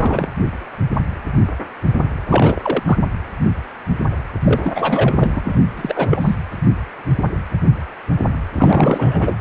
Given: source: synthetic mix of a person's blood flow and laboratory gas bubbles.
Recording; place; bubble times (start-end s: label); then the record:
Doppler ultrasound of blood flow; precordium
0.00-0.32 s: bubbles
2.26-2.83 s: bubbles
2.86-2.98 s: bubbles
4.42-5.63 s: bubbles
5.76-6.36 s: bubbles
8.54-9.35 s: bubbles
From the record:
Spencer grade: 3 (all of the cardiac periods contain showers or single bubble signals, but not dominating or overriding the cardiac motion signals); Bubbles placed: anywhere in the cardiac cycle